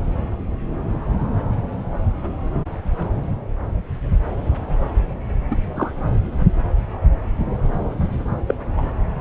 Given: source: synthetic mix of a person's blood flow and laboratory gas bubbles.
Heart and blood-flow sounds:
Doppler ultrasound of blood flow; subclavian vein
5.50-5.57 s: bubbles
5.75-5.92 s: bubbles
8.47-8.55 s: bubbles
8.77-8.93 s: bubbles
From the record:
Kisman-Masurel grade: 113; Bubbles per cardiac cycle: 1 to 2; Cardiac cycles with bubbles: 1 to 10%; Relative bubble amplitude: loud (0.450 to 0.775); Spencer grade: 1 (occasional bubble signal discernible with the cardiac motion signal, with majority of cardiac periods free of bubbles); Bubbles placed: anywhere in the cardiac cycle

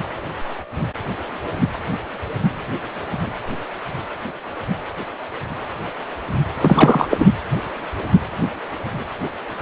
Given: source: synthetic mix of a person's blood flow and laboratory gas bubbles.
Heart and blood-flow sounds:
Doppler ultrasound of blood flow; precordium
6.61-7.08 s: bubbles
7.10-7.26 s: bubbles
From the record:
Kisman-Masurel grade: 213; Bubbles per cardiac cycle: several, 3 to 8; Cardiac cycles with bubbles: 1 to 10%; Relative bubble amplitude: loud (0.450 to 0.775); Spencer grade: 1 (occasional bubble signal discernible with the cardiac motion signal, with majority of cardiac periods free of bubbles); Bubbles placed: anywhere in the cardiac cycle

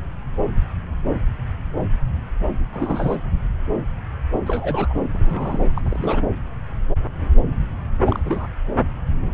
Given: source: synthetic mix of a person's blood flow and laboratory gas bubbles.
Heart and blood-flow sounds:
Doppler ultrasound of blood flow; subclavian vein
2.72-3.16 s: bubbles
4.46-4.94 s: bubbles
5.12-6.25 s: bubbles
8.05-8.20 s: bubbles
8.25-8.47 s: bubbles
From the record:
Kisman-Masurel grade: 221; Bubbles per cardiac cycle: several, 3 to 8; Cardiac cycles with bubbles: 10 to 50%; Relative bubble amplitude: barely perceptible (0.100 to 0.250); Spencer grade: 2 (many but less than half of the cardiac periods contain bubble signals, singularly or in groups); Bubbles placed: anywhere in the cardiac cycle

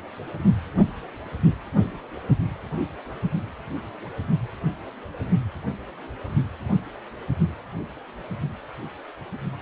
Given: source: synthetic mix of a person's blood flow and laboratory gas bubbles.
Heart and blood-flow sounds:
Doppler ultrasound of blood flow; precordium
no bubbles
From the record:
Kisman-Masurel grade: 000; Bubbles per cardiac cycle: 0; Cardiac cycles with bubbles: 0%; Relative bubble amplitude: no bubbles discernible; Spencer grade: 0 (complete lack of bubble signals)

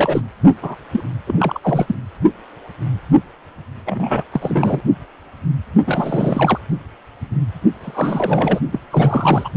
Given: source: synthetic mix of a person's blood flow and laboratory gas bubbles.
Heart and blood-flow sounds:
Doppler ultrasound of blood flow; precordium
0.00-0.21 s: bubbles
0.62-0.76 s: bubbles
0.92-1.03 s: bubbles
1.27-1.59 s: bubbles
1.61-1.95 s: bubbles
3.85-4.23 s: bubbles
4.32-4.81 s: bubbles
5.86-6.59 s: bubbles
7.80-8.60 s: bubbles
8.71-8.79 s: bubbles
8.90-9.49 s: bubbles
From the record:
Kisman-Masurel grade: 332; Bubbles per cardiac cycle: rolling drumbeat, 9 or more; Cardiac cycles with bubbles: 50 to 99%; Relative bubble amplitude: moderate (0.250 to 0.450); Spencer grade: 3 (all of the cardiac periods contain showers or single bubble signals, but not dominating or overriding the cardiac motion signals); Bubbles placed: only in the low amplitude regions of the cardiac cycle

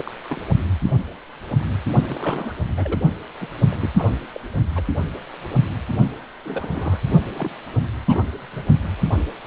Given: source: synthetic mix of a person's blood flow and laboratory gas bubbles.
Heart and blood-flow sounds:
Doppler ultrasound of blood flow; precordium
0.00-0.11 s: bubbles
0.24-0.42 s: bubbles
2.07-2.53 s: bubbles
2.75-3.01 s: bubbles
3.40-3.48 s: bubbles
3.71-3.76 s: bubbles
3.83-3.88 s: bubbles
3.97-4.14 s: bubbles
4.33-4.40 s: bubbles
4.76-4.83 s: bubbles
6.44-7.00 s: bubbles
7.29-7.54 s: bubbles
8.06-8.25 s: bubbles
8.34-8.63 s: bubbles
From the record:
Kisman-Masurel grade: 221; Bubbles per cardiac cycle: several, 3 to 8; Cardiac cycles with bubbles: 10 to 50%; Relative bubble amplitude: barely perceptible (0.100 to 0.250); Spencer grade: 2 (many but less than half of the cardiac periods contain bubble signals, singularly or in groups); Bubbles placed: only in the low amplitude regions of the cardiac cycle

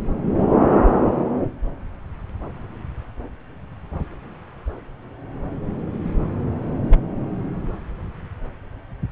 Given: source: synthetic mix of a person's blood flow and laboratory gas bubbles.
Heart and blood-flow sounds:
Doppler ultrasound of blood flow; subclavian vein
6.84-6.98 s: bubbles
From the record:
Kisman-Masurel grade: 111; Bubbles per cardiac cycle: 1 to 2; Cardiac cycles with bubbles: 1 to 10%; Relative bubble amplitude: barely perceptible (0.100 to 0.250); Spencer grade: 1 (occasional bubble signal discernible with the cardiac motion signal, with majority of cardiac periods free of bubbles); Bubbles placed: anywhere in the cardiac cycle

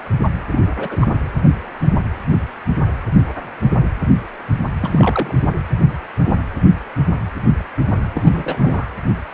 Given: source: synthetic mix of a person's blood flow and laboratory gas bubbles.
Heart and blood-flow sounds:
Doppler ultrasound of blood flow; precordium
0.50-0.61 s: bubbles
0.79-0.97 s: bubbles
1.01-1.07 s: bubbles
4.80-5.34 s: bubbles
8.13-8.85 s: bubbles
From the record:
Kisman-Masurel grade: 222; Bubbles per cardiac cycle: several, 3 to 8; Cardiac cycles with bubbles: 10 to 50%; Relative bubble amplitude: moderate (0.250 to 0.450); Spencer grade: 2 (many but less than half of the cardiac periods contain bubble signals, singularly or in groups); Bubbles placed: anywhere in the cardiac cycle

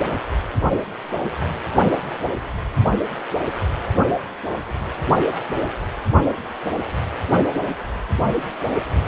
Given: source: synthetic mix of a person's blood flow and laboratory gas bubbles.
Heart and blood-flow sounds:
Doppler ultrasound of blood flow; precordium
no bubbles
From the record:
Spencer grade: 0 (complete lack of bubble signals)

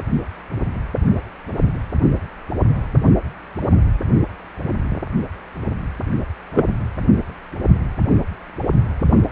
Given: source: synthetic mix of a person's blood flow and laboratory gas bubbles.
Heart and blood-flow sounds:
Doppler ultrasound of blood flow; precordium
6.51-6.75 s: bubbles
From the record:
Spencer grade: 1 (occasional bubble signal discernible with the cardiac motion signal, with majority of cardiac periods free of bubbles); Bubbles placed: anywhere in the cardiac cycle

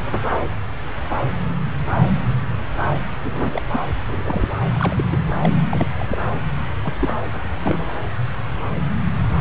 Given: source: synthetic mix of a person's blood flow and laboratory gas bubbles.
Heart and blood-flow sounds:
Doppler ultrasound of blood flow; subclavian vein
3.24-3.62 s: bubbles
3.73-3.79 s: bubbles
4.08-4.49 s: bubbles
4.73-5.04 s: bubbles
5.12-5.17 s: bubbles
5.42-5.50 s: bubbles
5.69-5.87 s: bubbles
5.97-6.18 s: bubbles
6.83-6.93 s: bubbles
6.96-7.17 s: bubbles
7.64-7.92 s: bubbles
From the record:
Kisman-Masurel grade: 221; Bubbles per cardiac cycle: several, 3 to 8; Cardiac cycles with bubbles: 10 to 50%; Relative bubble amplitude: barely perceptible (0.100 to 0.250); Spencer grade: 2 (many but less than half of the cardiac periods contain bubble signals, singularly or in groups); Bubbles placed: anywhere in the cardiac cycle

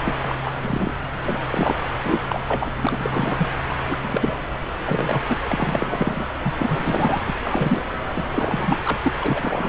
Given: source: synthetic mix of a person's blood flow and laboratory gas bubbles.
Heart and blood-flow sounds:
Doppler ultrasound of blood flow; subclavian vein
0.00-0.15 s: bubbles
0.24-0.36 s: bubbles
0.43-0.50 s: bubbles
0.62-0.93 s: bubbles
1.22-1.47 s: bubbles
1.50-1.87 s: bubbles
2.04-2.19 s: bubbles
2.29-2.40 s: bubbles
2.47-2.73 s: bubbles
2.81-3.48 s: bubbles
3.69-3.76 s: bubbles
3.82-3.98 s: bubbles
4.04-4.37 s: bubbles
4.85-5.22 s: bubbles
5.29-5.39 s: bubbles
5.49-6.24 s: bubbles
6.43-6.54 s: bubbles
6.57-7.22 s: bubbles
7.25-7.36 s: bubbles
7.43-7.83 s: bubbles
8.15-8.24 s: bubbles
8.30-8.79 s: bubbles
8.85-9.00 s: bubbles
9.04-9.12 s: bubbles
9.21-9.68 s: bubbles
From the record:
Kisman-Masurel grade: 342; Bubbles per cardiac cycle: rolling drumbeat, 9 or more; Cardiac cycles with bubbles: 100%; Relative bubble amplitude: moderate (0.250 to 0.450); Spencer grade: 3 (all of the cardiac periods contain showers or single bubble signals, but not dominating or overriding the cardiac motion signals); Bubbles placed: anywhere in the cardiac cycle

